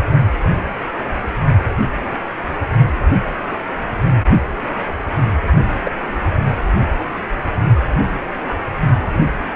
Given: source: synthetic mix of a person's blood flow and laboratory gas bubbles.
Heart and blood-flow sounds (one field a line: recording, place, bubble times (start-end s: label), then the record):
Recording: Doppler ultrasound of blood flow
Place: precordium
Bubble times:
5.83-5.91 s: bubbles
From the record:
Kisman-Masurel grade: 112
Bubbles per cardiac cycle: 1 to 2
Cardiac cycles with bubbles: 1 to 10%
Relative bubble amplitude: moderate (0.250 to 0.450)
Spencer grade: 1 (occasional bubble signal discernible with the cardiac motion signal, with majority of cardiac periods free of bubbles)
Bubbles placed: anywhere in the cardiac cycle